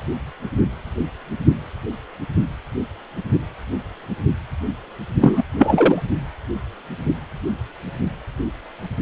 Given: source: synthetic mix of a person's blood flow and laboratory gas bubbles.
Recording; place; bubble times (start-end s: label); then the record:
Doppler ultrasound of blood flow; precordium
5.21-5.43 s: bubbles
5.58-6.01 s: bubbles
From the record:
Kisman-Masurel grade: 213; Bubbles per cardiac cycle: several, 3 to 8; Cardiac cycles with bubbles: 1 to 10%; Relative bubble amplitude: loud (0.450 to 0.775); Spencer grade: 1 (occasional bubble signal discernible with the cardiac motion signal, with majority of cardiac periods free of bubbles); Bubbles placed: only in the low amplitude regions of the cardiac cycle